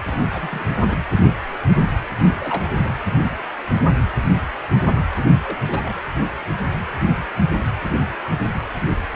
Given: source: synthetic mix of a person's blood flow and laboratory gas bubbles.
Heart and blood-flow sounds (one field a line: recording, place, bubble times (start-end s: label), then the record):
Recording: Doppler ultrasound of blood flow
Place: precordium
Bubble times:
0.05-0.26 s: bubbles
0.29-0.65 s: bubbles
0.77-0.97 s: bubbles
2.40-2.69 s: bubbles
5.16-5.21 s: bubbles
5.42-5.58 s: bubbles
5.60-5.93 s: bubbles
From the record:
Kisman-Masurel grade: 221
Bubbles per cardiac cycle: several, 3 to 8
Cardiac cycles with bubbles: 10 to 50%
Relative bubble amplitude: barely perceptible (0.100 to 0.250)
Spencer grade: 2 (many but less than half of the cardiac periods contain bubble signals, singularly or in groups)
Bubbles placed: anywhere in the cardiac cycle